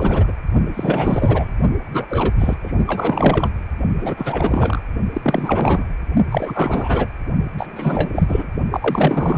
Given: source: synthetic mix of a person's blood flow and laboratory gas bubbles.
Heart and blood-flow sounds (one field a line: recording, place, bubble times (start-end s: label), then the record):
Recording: Doppler ultrasound of blood flow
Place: precordium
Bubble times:
0.00-0.32 s: bubbles
0.74-1.55 s: bubbles
1.93-2.06 s: bubbles
2.09-2.33 s: bubbles
2.38-2.55 s: bubbles
2.63-2.72 s: bubbles
2.77-3.48 s: bubbles
3.99-4.83 s: bubbles
5.13-5.84 s: bubbles
6.31-7.08 s: bubbles
7.54-8.47 s: bubbles
8.71-9.38 s: bubbles
From the record:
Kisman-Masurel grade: 444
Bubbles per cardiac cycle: continuous sound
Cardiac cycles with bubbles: 100%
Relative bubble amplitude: maximal (0.775 to 0.999)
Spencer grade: 4 (maximum detectable bubble signal sounding continuously throughout systole and diastole of every cardiac period, and overriding the amplitude of the normal cardiac signals)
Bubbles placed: only in the low amplitude regions of the cardiac cycle